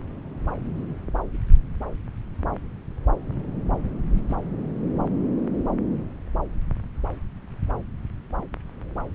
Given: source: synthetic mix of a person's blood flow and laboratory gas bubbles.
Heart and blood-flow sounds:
Doppler ultrasound of blood flow; subclavian vein
4.16-4.21 s: bubbles
4.29-4.36 s: bubbles
From the record:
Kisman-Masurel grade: 112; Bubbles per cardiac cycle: 1 to 2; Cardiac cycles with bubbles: 1 to 10%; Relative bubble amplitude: moderate (0.250 to 0.450); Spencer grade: 1 (occasional bubble signal discernible with the cardiac motion signal, with majority of cardiac periods free of bubbles); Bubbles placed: anywhere in the cardiac cycle

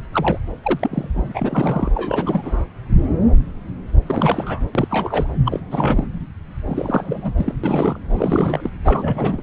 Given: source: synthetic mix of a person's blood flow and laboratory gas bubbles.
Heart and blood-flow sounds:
Doppler ultrasound of blood flow; subclavian vein
0.12-0.38 s: bubbles
0.62-1.08 s: bubbles
1.15-1.92 s: bubbles
1.94-2.65 s: bubbles
4.06-4.61 s: bubbles
4.75-4.88 s: bubbles
4.90-5.33 s: bubbles
5.45-5.60 s: bubbles
5.71-6.05 s: bubbles
6.66-7.32 s: bubbles
7.38-7.54 s: bubbles
7.63-7.99 s: bubbles
8.10-8.70 s: bubbles
8.85-9.42 s: bubbles
From the record:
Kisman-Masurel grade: 332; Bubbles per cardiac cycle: rolling drumbeat, 9 or more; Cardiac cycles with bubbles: 50 to 99%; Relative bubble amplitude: moderate (0.250 to 0.450); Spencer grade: 3 (all of the cardiac periods contain showers or single bubble signals, but not dominating or overriding the cardiac motion signals); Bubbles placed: anywhere in the cardiac cycle

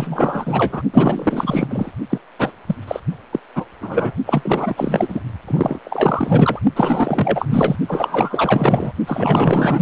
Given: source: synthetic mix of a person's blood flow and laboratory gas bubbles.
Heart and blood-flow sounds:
Doppler ultrasound of blood flow; precordium
0.00-0.82 s: bubbles
0.93-1.67 s: bubbles
1.69-1.92 s: bubbles
2.10-2.18 s: bubbles
2.39-2.51 s: bubbles
2.66-2.75 s: bubbles
2.88-3.00 s: bubbles
3.31-3.40 s: bubbles
3.55-3.66 s: bubbles
3.81-4.15 s: bubbles
4.25-5.21 s: bubbles
5.47-5.79 s: bubbles
5.84-6.59 s: bubbles
6.76-7.46 s: bubbles
7.49-7.76 s: bubbles
7.88-8.92 s: bubbles
9.06-9.82 s: bubbles
From the record:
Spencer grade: 4 (maximum detectable bubble signal sounding continuously throughout systole and diastole of every cardiac period, and overriding the amplitude of the normal cardiac signals); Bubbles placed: only in the low amplitude regions of the cardiac cycle

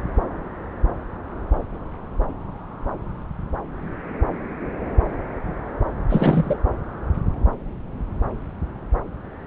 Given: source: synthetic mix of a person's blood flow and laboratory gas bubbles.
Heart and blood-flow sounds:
Doppler ultrasound of blood flow; subclavian vein
6.09-6.56 s: bubbles
From the record:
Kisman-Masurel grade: 222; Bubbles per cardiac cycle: several, 3 to 8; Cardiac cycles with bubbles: 10 to 50%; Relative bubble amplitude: moderate (0.250 to 0.450); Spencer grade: 2 (many but less than half of the cardiac periods contain bubble signals, singularly or in groups); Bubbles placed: anywhere in the cardiac cycle

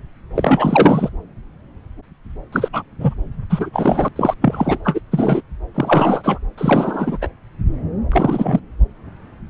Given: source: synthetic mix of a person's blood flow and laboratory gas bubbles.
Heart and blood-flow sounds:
Doppler ultrasound of blood flow; subclavian vein
0.35-1.10 s: bubbles
2.52-2.69 s: bubbles
2.73-2.83 s: bubbles
3.00-3.14 s: bubbles
3.50-3.69 s: bubbles
3.73-4.08 s: bubbles
4.16-4.35 s: bubbles
4.41-4.78 s: bubbles
4.84-5.01 s: bubbles
5.11-5.42 s: bubbles
5.74-6.39 s: bubbles
6.58-7.18 s: bubbles
7.21-7.28 s: bubbles
8.12-8.59 s: bubbles
From the record:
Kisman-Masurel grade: 233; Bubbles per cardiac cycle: several, 3 to 8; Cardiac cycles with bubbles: 50 to 99%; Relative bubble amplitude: loud (0.450 to 0.775); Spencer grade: 3 (all of the cardiac periods contain showers or single bubble signals, but not dominating or overriding the cardiac motion signals); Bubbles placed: anywhere in the cardiac cycle

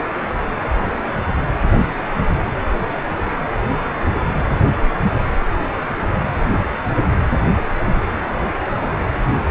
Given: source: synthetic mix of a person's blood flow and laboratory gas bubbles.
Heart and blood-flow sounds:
Doppler ultrasound of blood flow; precordium
no bubbles
From the record:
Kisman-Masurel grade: 000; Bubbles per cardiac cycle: 0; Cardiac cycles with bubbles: 0%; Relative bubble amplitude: no bubbles discernible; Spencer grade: 0 (complete lack of bubble signals)

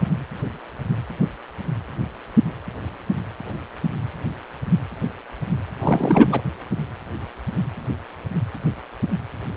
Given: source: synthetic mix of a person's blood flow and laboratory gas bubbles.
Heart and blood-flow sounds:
Doppler ultrasound of blood flow; precordium
5.79-6.42 s: bubbles
From the record:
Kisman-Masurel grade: 223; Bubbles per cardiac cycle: several, 3 to 8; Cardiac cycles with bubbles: 10 to 50%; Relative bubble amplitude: loud (0.450 to 0.775); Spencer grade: 2 (many but less than half of the cardiac periods contain bubble signals, singularly or in groups); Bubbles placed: anywhere in the cardiac cycle

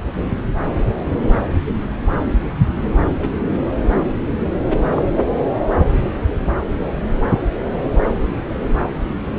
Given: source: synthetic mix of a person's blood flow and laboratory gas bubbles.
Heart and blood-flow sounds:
Doppler ultrasound of blood flow; subclavian vein
3.19-3.29 s: bubbles
4.96-5.02 s: bubbles
From the record:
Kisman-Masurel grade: 122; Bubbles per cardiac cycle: 1 to 2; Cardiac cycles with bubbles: 10 to 50%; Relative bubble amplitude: moderate (0.250 to 0.450); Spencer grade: 2 (many but less than half of the cardiac periods contain bubble signals, singularly or in groups); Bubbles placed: anywhere in the cardiac cycle

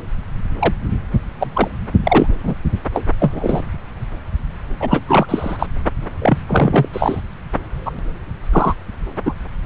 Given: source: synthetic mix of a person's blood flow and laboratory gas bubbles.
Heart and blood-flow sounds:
Doppler ultrasound of blood flow; subclavian vein
0.59-0.74 s: bubbles
1.40-1.68 s: bubbles
2.04-2.27 s: bubbles
2.42-2.55 s: bubbles
2.94-3.04 s: bubbles
3.19-3.63 s: bubbles
4.80-5.00 s: bubbles
5.07-5.67 s: bubbles
6.19-6.38 s: bubbles
6.47-6.89 s: bubbles
6.93-7.21 s: bubbles
7.86-7.92 s: bubbles
7.97-7.99 s: bubbles
8.52-8.74 s: bubbles
9.26-9.34 s: bubbles
From the record:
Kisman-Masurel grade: 243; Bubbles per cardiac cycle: several, 3 to 8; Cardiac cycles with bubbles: 100%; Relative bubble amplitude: loud (0.450 to 0.775); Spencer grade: 3 (all of the cardiac periods contain showers or single bubble signals, but not dominating or overriding the cardiac motion signals); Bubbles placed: anywhere in the cardiac cycle

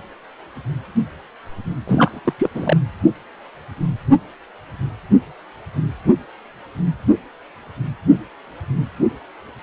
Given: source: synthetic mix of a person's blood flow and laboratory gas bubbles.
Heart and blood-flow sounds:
Doppler ultrasound of blood flow; precordium
1.88-2.19 s: bubbles
2.25-2.33 s: bubbles
2.38-2.50 s: bubbles
2.54-2.77 s: bubbles
From the record:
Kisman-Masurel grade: 212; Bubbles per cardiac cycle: several, 3 to 8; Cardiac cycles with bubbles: 1 to 10%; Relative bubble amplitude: moderate (0.250 to 0.450); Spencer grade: 1 (occasional bubble signal discernible with the cardiac motion signal, with majority of cardiac periods free of bubbles); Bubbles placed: anywhere in the cardiac cycle

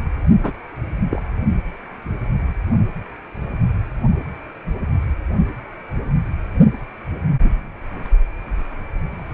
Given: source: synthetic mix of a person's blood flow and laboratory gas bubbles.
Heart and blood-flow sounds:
Doppler ultrasound of blood flow; precordium
0.43-0.52 s: bubbles
1.10-1.22 s: bubbles
From the record:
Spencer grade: 1 (occasional bubble signal discernible with the cardiac motion signal, with majority of cardiac periods free of bubbles); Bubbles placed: only in the low amplitude regions of the cardiac cycle

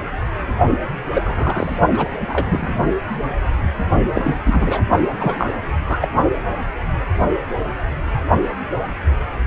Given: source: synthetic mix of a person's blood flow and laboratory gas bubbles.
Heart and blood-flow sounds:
Doppler ultrasound of blood flow; precordium
1.13-1.79 s: bubbles
1.94-2.10 s: bubbles
2.19-2.75 s: bubbles
4.13-4.35 s: bubbles
4.45-4.81 s: bubbles
5.19-5.47 s: bubbles
5.88-6.08 s: bubbles
From the record:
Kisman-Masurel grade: 222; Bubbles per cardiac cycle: several, 3 to 8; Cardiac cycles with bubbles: 10 to 50%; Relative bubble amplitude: moderate (0.250 to 0.450); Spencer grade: 2 (many but less than half of the cardiac periods contain bubble signals, singularly or in groups); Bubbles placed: only in the low amplitude regions of the cardiac cycle

